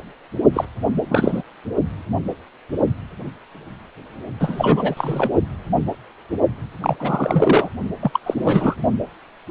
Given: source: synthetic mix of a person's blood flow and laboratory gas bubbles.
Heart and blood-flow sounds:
Doppler ultrasound of blood flow; precordium
0.53-0.65 s: bubbles
1.10-1.43 s: bubbles
4.40-5.32 s: bubbles
6.82-6.96 s: bubbles
7.00-7.69 s: bubbles
8.01-8.10 s: bubbles
8.13-8.20 s: bubbles
8.26-8.75 s: bubbles
From the record:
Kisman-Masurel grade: 333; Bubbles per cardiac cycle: rolling drumbeat, 9 or more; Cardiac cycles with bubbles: 50 to 99%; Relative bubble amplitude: loud (0.450 to 0.775); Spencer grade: 3 (all of the cardiac periods contain showers or single bubble signals, but not dominating or overriding the cardiac motion signals); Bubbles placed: only in the low amplitude regions of the cardiac cycle

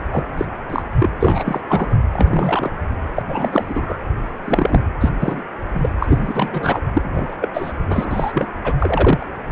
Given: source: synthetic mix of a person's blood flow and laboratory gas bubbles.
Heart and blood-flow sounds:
Doppler ultrasound of blood flow; precordium
0.10-0.25 s: bubbles
0.37-0.46 s: bubbles
0.68-0.82 s: bubbles
0.92-1.09 s: bubbles
1.19-1.60 s: bubbles
1.69-1.96 s: bubbles
2.12-2.72 s: bubbles
3.16-3.23 s: bubbles
3.27-3.96 s: bubbles
4.45-4.80 s: bubbles
5.00-5.12 s: bubbles
5.21-5.42 s: bubbles
5.74-5.89 s: bubbles
6.01-6.81 s: bubbles
6.94-7.37 s: bubbles
7.41-7.49 s: bubbles
7.54-7.72 s: bubbles
7.87-8.46 s: bubbles
8.63-8.76 s: bubbles
8.79-9.28 s: bubbles
9.49-9.52 s: bubbles
From the record:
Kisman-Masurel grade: 243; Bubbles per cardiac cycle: several, 3 to 8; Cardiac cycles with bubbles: 100%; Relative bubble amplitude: loud (0.450 to 0.775); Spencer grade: 3 (all of the cardiac periods contain showers or single bubble signals, but not dominating or overriding the cardiac motion signals); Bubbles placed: anywhere in the cardiac cycle

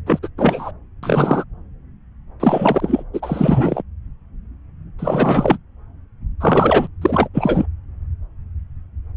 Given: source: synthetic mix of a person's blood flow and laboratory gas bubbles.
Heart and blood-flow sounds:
Doppler ultrasound of blood flow; subclavian vein
0.06-0.19 s: bubbles
0.23-0.28 s: bubbles
0.38-0.72 s: bubbles
1.03-1.44 s: bubbles
2.40-3.03 s: bubbles
3.13-3.82 s: bubbles
4.98-5.58 s: bubbles
6.40-6.88 s: bubbles
7.01-7.29 s: bubbles
7.33-7.65 s: bubbles
From the record:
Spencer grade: 3 (all of the cardiac periods contain showers or single bubble signals, but not dominating or overriding the cardiac motion signals); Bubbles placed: anywhere in the cardiac cycle

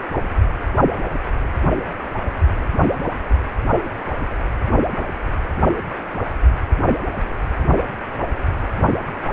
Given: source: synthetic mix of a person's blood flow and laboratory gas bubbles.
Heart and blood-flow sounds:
Doppler ultrasound of blood flow; precordium
no bubbles
From the record:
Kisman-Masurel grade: 000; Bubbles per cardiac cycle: 0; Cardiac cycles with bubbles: 0%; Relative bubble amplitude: no bubbles discernible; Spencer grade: 0 (complete lack of bubble signals)

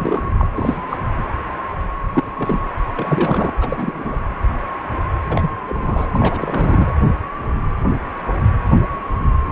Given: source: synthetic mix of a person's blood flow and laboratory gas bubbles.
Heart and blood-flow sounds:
Doppler ultrasound of blood flow; precordium
0.00-0.26 s: bubbles
0.38-0.47 s: bubbles
0.55-0.97 s: bubbles
2.12-2.23 s: bubbles
2.35-2.60 s: bubbles
2.98-3.54 s: bubbles
3.60-4.17 s: bubbles
5.28-5.50 s: bubbles
5.66-5.75 s: bubbles
5.81-6.10 s: bubbles
6.14-6.93 s: bubbles
From the record:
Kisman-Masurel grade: 232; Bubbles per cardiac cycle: several, 3 to 8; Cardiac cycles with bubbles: 50 to 99%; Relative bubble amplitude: moderate (0.250 to 0.450); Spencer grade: 3 (all of the cardiac periods contain showers or single bubble signals, but not dominating or overriding the cardiac motion signals); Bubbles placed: anywhere in the cardiac cycle

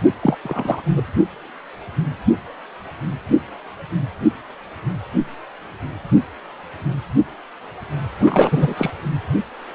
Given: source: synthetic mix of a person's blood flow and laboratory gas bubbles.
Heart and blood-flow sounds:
Doppler ultrasound of blood flow; precordium
0.22-0.36 s: bubbles
0.43-0.82 s: bubbles
0.95-1.02 s: bubbles
8.19-8.74 s: bubbles
8.77-8.90 s: bubbles
From the record:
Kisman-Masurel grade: 223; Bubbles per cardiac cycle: several, 3 to 8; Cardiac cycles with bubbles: 10 to 50%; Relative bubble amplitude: loud (0.450 to 0.775); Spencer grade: 2 (many but less than half of the cardiac periods contain bubble signals, singularly or in groups); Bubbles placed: anywhere in the cardiac cycle

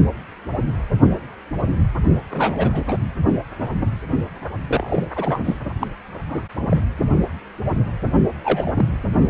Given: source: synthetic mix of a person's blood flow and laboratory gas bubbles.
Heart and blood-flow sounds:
Doppler ultrasound of blood flow; precordium
2.30-2.81 s: bubbles
2.88-2.96 s: bubbles
4.67-5.07 s: bubbles
5.16-5.58 s: bubbles
5.79-5.87 s: bubbles
6.26-6.46 s: bubbles
6.55-6.77 s: bubbles
8.43-8.71 s: bubbles
8.74-8.86 s: bubbles
From the record:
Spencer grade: 2 (many but less than half of the cardiac periods contain bubble signals, singularly or in groups); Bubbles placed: only in the low amplitude regions of the cardiac cycle

